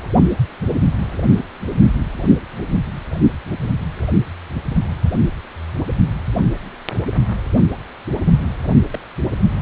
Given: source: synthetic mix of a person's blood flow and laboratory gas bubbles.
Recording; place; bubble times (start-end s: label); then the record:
Doppler ultrasound of blood flow; precordium
2.62-2.69 s: bubbles
8.23-8.45 s: bubbles
8.93-8.99 s: bubbles
From the record:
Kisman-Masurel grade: 121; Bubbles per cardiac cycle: 1 to 2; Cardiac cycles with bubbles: 10 to 50%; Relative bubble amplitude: barely perceptible (0.100 to 0.250); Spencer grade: 2 (many but less than half of the cardiac periods contain bubble signals, singularly or in groups); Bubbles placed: anywhere in the cardiac cycle